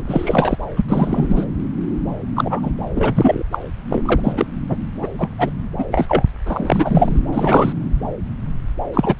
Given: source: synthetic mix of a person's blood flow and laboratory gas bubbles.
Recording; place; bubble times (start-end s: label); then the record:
Doppler ultrasound of blood flow; subclavian vein
0.07-0.58 s: bubbles
0.76-0.82 s: bubbles
0.88-1.46 s: bubbles
2.35-2.71 s: bubbles
2.94-3.43 s: bubbles
3.52-3.59 s: bubbles
3.90-4.32 s: bubbles
4.37-4.46 s: bubbles
4.69-4.77 s: bubbles
5.02-5.07 s: bubbles
5.18-5.28 s: bubbles
5.38-5.50 s: bubbles
5.78-5.85 s: bubbles
5.91-6.24 s: bubbles
6.46-7.20 s: bubbles
7.32-7.72 s: bubbles
8.94-9.16 s: bubbles
From the record:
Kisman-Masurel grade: 233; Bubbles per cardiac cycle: several, 3 to 8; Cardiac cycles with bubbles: 50 to 99%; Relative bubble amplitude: loud (0.450 to 0.775); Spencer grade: 3 (all of the cardiac periods contain showers or single bubble signals, but not dominating or overriding the cardiac motion signals); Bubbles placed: anywhere in the cardiac cycle